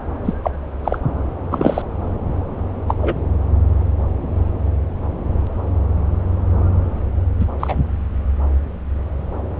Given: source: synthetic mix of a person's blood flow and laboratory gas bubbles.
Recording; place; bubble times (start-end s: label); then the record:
Doppler ultrasound of blood flow; subclavian vein
0.25-0.34 s: bubbles
0.43-0.51 s: bubbles
0.84-0.98 s: bubbles
1.50-1.82 s: bubbles
2.88-2.95 s: bubbles
3.02-3.21 s: bubbles
7.39-7.46 s: bubbles
7.60-7.84 s: bubbles
From the record:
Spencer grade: 2 (many but less than half of the cardiac periods contain bubble signals, singularly or in groups); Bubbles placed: anywhere in the cardiac cycle